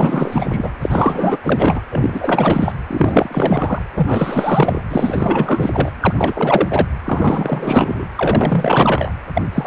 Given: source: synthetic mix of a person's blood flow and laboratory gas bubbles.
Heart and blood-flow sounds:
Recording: Doppler ultrasound of blood flow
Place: precordium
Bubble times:
0.00-0.74 s: bubbles
0.81-1.39 s: bubbles
1.43-1.81 s: bubbles
1.91-2.72 s: bubbles
2.87-3.82 s: bubbles
3.96-4.81 s: bubbles
4.90-5.91 s: bubbles
6.00-6.14 s: bubbles
6.17-6.85 s: bubbles
7.04-8.05 s: bubbles
8.15-9.12 s: bubbles
9.34-9.41 s: bubbles
9.53-9.67 s: bubbles
From the record:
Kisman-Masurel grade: 444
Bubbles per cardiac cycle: continuous sound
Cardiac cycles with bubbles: 100%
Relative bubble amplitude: maximal (0.775 to 0.999)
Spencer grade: 4 (maximum detectable bubble signal sounding continuously throughout systole and diastole of every cardiac period, and overriding the amplitude of the normal cardiac signals)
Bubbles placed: anywhere in the cardiac cycle

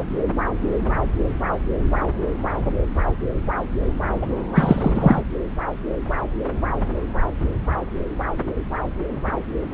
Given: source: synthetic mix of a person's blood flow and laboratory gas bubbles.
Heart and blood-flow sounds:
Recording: Doppler ultrasound of blood flow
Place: subclavian vein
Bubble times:
4.21-4.26 s: bubbles
4.55-5.22 s: bubbles
From the record:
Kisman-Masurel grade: 213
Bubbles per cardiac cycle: several, 3 to 8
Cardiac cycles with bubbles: 1 to 10%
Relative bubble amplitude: loud (0.450 to 0.775)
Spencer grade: 1 (occasional bubble signal discernible with the cardiac motion signal, with majority of cardiac periods free of bubbles)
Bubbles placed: anywhere in the cardiac cycle

